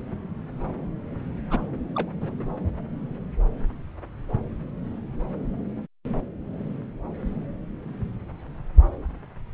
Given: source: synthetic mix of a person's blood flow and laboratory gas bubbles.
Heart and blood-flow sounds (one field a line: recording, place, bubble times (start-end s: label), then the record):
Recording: Doppler ultrasound of blood flow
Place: subclavian vein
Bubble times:
1.50-1.67 s: bubbles
1.95-2.10 s: bubbles
2.21-2.34 s: bubbles
2.38-2.44 s: bubbles
From the record:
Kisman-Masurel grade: 211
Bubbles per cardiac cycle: several, 3 to 8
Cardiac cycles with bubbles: 1 to 10%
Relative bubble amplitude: barely perceptible (0.100 to 0.250)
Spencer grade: 1 (occasional bubble signal discernible with the cardiac motion signal, with majority of cardiac periods free of bubbles)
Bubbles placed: anywhere in the cardiac cycle